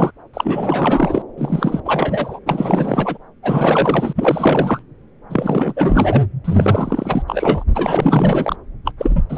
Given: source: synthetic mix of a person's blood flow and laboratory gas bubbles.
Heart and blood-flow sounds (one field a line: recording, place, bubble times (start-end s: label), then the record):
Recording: Doppler ultrasound of blood flow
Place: subclavian vein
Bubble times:
0.00-0.10 s: bubbles
0.33-1.23 s: bubbles
1.38-1.81 s: bubbles
1.85-2.39 s: bubbles
2.46-3.19 s: bubbles
3.42-4.13 s: bubbles
4.16-4.83 s: bubbles
5.29-5.74 s: bubbles
5.76-6.23 s: bubbles
6.44-7.22 s: bubbles
7.27-7.64 s: bubbles
7.74-8.56 s: bubbles
8.85-8.92 s: bubbles
8.99-9.23 s: bubbles
9.29-9.38 s: bubbles
From the record:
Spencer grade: 4 (maximum detectable bubble signal sounding continuously throughout systole and diastole of every cardiac period, and overriding the amplitude of the normal cardiac signals)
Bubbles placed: anywhere in the cardiac cycle